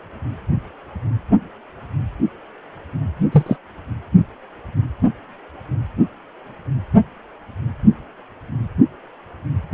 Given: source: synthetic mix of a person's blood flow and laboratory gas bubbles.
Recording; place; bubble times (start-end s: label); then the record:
Doppler ultrasound of blood flow; precordium
3.31-3.44 s: bubbles
3.46-3.56 s: bubbles
From the record:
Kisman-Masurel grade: 113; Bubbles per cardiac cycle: 1 to 2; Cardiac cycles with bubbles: 1 to 10%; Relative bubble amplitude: loud (0.450 to 0.775); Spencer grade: 1 (occasional bubble signal discernible with the cardiac motion signal, with majority of cardiac periods free of bubbles); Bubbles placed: anywhere in the cardiac cycle